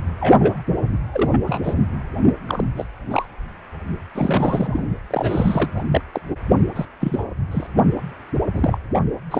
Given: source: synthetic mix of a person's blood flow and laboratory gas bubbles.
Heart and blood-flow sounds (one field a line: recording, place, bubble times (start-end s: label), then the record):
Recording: Doppler ultrasound of blood flow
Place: precordium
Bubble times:
0.19-0.63 s: bubbles
1.12-1.40 s: bubbles
1.43-1.74 s: bubbles
2.42-2.65 s: bubbles
2.77-2.85 s: bubbles
3.10-3.25 s: bubbles
4.15-4.88 s: bubbles
5.10-5.70 s: bubbles
5.76-5.82 s: bubbles
5.90-6.01 s: bubbles
6.13-6.21 s: bubbles
6.75-6.85 s: bubbles
7.00-7.24 s: bubbles
7.51-7.66 s: bubbles
8.52-8.79 s: bubbles
9.30-9.39 s: bubbles
From the record:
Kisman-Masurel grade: 242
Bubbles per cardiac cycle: several, 3 to 8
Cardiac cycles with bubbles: 100%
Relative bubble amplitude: moderate (0.250 to 0.450)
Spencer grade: 3 (all of the cardiac periods contain showers or single bubble signals, but not dominating or overriding the cardiac motion signals)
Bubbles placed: only in the low amplitude regions of the cardiac cycle